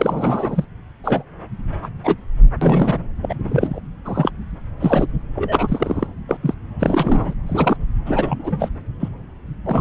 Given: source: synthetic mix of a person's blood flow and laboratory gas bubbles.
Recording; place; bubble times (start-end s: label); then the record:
Doppler ultrasound of blood flow; subclavian vein
0.00-0.65 s: bubbles
1.03-1.23 s: bubbles
1.82-1.88 s: bubbles
2.03-2.15 s: bubbles
2.61-2.99 s: bubbles
3.21-3.34 s: bubbles
3.44-3.79 s: bubbles
4.04-4.31 s: bubbles
4.80-5.07 s: bubbles
5.35-6.07 s: bubbles
6.28-6.37 s: bubbles
6.42-6.54 s: bubbles
6.79-7.34 s: bubbles
7.46-7.77 s: bubbles
8.05-8.69 s: bubbles
9.00-9.09 s: bubbles
9.64-9.81 s: bubbles
From the record:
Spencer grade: 3 (all of the cardiac periods contain showers or single bubble signals, but not dominating or overriding the cardiac motion signals); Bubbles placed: anywhere in the cardiac cycle